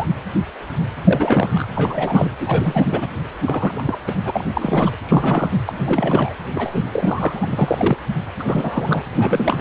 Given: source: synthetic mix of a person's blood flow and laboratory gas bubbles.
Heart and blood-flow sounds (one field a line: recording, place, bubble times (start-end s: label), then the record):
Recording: Doppler ultrasound of blood flow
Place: precordium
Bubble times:
0.00-0.07 s: bubbles
1.04-1.67 s: bubbles
1.75-2.30 s: bubbles
2.40-3.08 s: bubbles
3.44-3.99 s: bubbles
4.07-4.12 s: bubbles
4.25-4.31 s: bubbles
4.33-4.92 s: bubbles
5.07-5.51 s: bubbles
5.66-5.73 s: bubbles
5.80-6.33 s: bubbles
6.54-6.82 s: bubbles
6.92-7.47 s: bubbles
7.52-7.97 s: bubbles
8.39-8.44 s: bubbles
8.46-9.04 s: bubbles
9.13-9.61 s: bubbles
From the record:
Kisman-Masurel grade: 332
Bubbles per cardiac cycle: rolling drumbeat, 9 or more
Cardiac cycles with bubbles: 50 to 99%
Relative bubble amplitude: moderate (0.250 to 0.450)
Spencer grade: 3 (all of the cardiac periods contain showers or single bubble signals, but not dominating or overriding the cardiac motion signals)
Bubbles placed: anywhere in the cardiac cycle